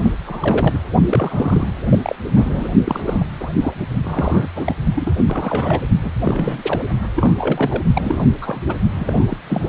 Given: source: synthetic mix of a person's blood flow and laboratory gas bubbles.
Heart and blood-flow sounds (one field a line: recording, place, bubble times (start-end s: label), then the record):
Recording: Doppler ultrasound of blood flow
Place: precordium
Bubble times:
0.02-0.14 s: bubbles
0.26-0.78 s: bubbles
1.07-1.69 s: bubbles
1.89-1.98 s: bubbles
2.02-2.16 s: bubbles
2.35-2.73 s: bubbles
2.85-3.27 s: bubbles
3.40-3.49 s: bubbles
3.60-3.73 s: bubbles
4.03-4.48 s: bubbles
4.54-4.74 s: bubbles
4.96-5.12 s: bubbles
5.17-5.81 s: bubbles
6.02-6.11 s: bubbles
6.23-6.86 s: bubbles
7.15-7.83 s: bubbles
7.94-8.24 s: bubbles
8.41-8.77 s: bubbles
8.95-9.37 s: bubbles
9.42-9.69 s: bubbles
From the record:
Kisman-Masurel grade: 332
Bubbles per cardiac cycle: rolling drumbeat, 9 or more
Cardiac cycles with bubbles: 50 to 99%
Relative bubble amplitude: moderate (0.250 to 0.450)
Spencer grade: 3 (all of the cardiac periods contain showers or single bubble signals, but not dominating or overriding the cardiac motion signals)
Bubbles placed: only in the low amplitude regions of the cardiac cycle